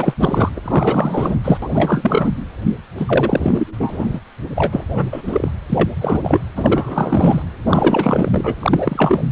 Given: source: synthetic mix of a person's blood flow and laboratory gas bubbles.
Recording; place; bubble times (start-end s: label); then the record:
Doppler ultrasound of blood flow; precordium
0.00-0.14 s: bubbles
0.20-0.49 s: bubbles
0.56-0.60 s: bubbles
0.65-1.36 s: bubbles
1.44-1.57 s: bubbles
1.62-2.33 s: bubbles
2.96-4.21 s: bubbles
4.55-4.84 s: bubbles
4.88-5.22 s: bubbles
5.26-5.50 s: bubbles
5.69-5.89 s: bubbles
6.00-6.42 s: bubbles
6.56-7.42 s: bubbles
7.67-8.55 s: bubbles
8.60-9.27 s: bubbles
From the record:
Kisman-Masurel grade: 333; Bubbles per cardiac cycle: rolling drumbeat, 9 or more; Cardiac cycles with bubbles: 50 to 99%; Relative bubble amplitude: loud (0.450 to 0.775); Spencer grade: 3 (all of the cardiac periods contain showers or single bubble signals, but not dominating or overriding the cardiac motion signals); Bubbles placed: anywhere in the cardiac cycle